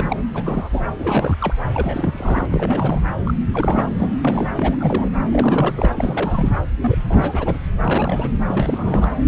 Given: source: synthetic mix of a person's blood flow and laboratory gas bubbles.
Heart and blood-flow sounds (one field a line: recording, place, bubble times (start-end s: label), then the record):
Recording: Doppler ultrasound of blood flow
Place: subclavian vein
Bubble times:
0.00-0.16 s: bubbles
0.35-0.69 s: bubbles
0.72-0.81 s: bubbles
0.98-1.35 s: bubbles
1.39-1.53 s: bubbles
1.73-2.46 s: bubbles
2.50-3.02 s: bubbles
3.25-3.34 s: bubbles
3.52-3.89 s: bubbles
3.97-4.14 s: bubbles
4.22-4.49 s: bubbles
4.55-4.77 s: bubbles
4.79-5.09 s: bubbles
5.31-6.50 s: bubbles
6.80-6.98 s: bubbles
7.09-7.59 s: bubbles
7.85-8.29 s: bubbles
8.48-9.11 s: bubbles
From the record:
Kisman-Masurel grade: 342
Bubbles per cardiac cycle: rolling drumbeat, 9 or more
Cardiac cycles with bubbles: 100%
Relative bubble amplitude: moderate (0.250 to 0.450)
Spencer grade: 3 (all of the cardiac periods contain showers or single bubble signals, but not dominating or overriding the cardiac motion signals)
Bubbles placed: anywhere in the cardiac cycle